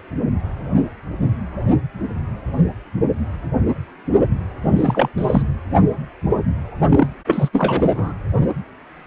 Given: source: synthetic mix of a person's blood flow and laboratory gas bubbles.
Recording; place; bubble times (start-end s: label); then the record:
Doppler ultrasound of blood flow; precordium
4.62-5.09 s: bubbles
5.18-5.43 s: bubbles
6.89-7.08 s: bubbles
7.27-7.49 s: bubbles
7.53-8.13 s: bubbles
From the record:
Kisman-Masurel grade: 222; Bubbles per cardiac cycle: several, 3 to 8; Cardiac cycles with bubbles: 10 to 50%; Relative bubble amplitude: moderate (0.250 to 0.450); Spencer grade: 2 (many but less than half of the cardiac periods contain bubble signals, singularly or in groups); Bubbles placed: anywhere in the cardiac cycle